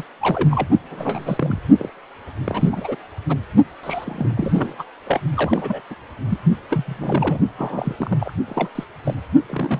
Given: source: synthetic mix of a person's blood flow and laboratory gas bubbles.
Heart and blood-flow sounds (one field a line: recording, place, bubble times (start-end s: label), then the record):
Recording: Doppler ultrasound of blood flow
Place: precordium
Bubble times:
0.00-0.03 s: bubbles
0.20-0.68 s: bubbles
0.90-1.59 s: bubbles
1.78-1.90 s: bubbles
2.44-2.96 s: bubbles
3.29-3.36 s: bubbles
3.83-4.83 s: bubbles
5.07-5.21 s: bubbles
5.35-5.81 s: bubbles
5.90-5.95 s: bubbles
6.29-6.38 s: bubbles
6.70-7.39 s: bubbles
7.57-8.17 s: bubbles
8.20-8.33 s: bubbles
8.48-8.69 s: bubbles
8.75-8.84 s: bubbles
9.04-9.15 s: bubbles
9.46-9.80 s: bubbles
From the record:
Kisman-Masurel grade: 242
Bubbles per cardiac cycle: several, 3 to 8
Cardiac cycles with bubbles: 100%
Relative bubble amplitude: moderate (0.250 to 0.450)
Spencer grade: 3 (all of the cardiac periods contain showers or single bubble signals, but not dominating or overriding the cardiac motion signals)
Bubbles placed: only in the low amplitude regions of the cardiac cycle